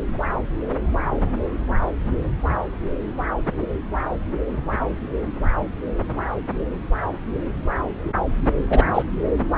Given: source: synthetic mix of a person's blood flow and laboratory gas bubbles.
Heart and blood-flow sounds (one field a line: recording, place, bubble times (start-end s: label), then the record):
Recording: Doppler ultrasound of blood flow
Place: subclavian vein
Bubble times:
8.70-8.84 s: bubbles
8.95-9.03 s: bubbles
From the record:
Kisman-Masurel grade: 123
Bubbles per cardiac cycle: 1 to 2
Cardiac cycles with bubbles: 10 to 50%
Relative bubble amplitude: loud (0.450 to 0.775)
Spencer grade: 2 (many but less than half of the cardiac periods contain bubble signals, singularly or in groups)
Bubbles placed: anywhere in the cardiac cycle